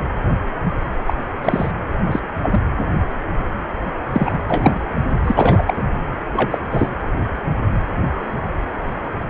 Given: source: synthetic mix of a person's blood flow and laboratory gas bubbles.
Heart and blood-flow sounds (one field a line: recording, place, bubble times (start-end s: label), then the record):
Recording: Doppler ultrasound of blood flow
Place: precordium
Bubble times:
1.06-1.14 s: bubbles
1.43-1.71 s: bubbles
1.98-2.19 s: bubbles
2.42-2.60 s: bubbles
4.13-4.38 s: bubbles
4.47-4.80 s: bubbles
5.24-5.62 s: bubbles
5.67-5.82 s: bubbles
6.34-6.58 s: bubbles
6.71-6.91 s: bubbles
From the record:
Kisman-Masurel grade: 223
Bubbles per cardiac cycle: several, 3 to 8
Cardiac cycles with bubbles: 10 to 50%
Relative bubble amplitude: loud (0.450 to 0.775)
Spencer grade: 2 (many but less than half of the cardiac periods contain bubble signals, singularly or in groups)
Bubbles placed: anywhere in the cardiac cycle